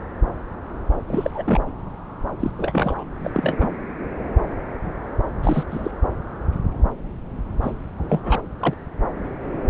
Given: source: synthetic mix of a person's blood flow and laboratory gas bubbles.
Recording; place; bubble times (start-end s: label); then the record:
Doppler ultrasound of blood flow; subclavian vein
1.06-1.30 s: bubbles
1.34-1.60 s: bubbles
2.40-2.51 s: bubbles
2.57-3.04 s: bubbles
3.24-3.69 s: bubbles
5.42-5.63 s: bubbles
5.71-5.91 s: bubbles
7.62-7.73 s: bubbles
7.97-8.42 s: bubbles
8.60-8.74 s: bubbles
From the record:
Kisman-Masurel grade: 222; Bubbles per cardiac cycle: several, 3 to 8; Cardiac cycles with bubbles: 10 to 50%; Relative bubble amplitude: moderate (0.250 to 0.450); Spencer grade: 2 (many but less than half of the cardiac periods contain bubble signals, singularly or in groups); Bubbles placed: anywhere in the cardiac cycle